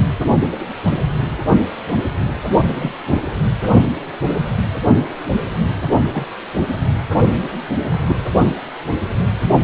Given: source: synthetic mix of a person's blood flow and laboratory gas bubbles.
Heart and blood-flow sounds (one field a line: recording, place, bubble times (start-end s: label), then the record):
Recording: Doppler ultrasound of blood flow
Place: precordium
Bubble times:
2.46-2.92 s: bubbles
6.13-6.31 s: bubbles
7.88-8.17 s: bubbles
From the record:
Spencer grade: 2 (many but less than half of the cardiac periods contain bubble signals, singularly or in groups)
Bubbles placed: anywhere in the cardiac cycle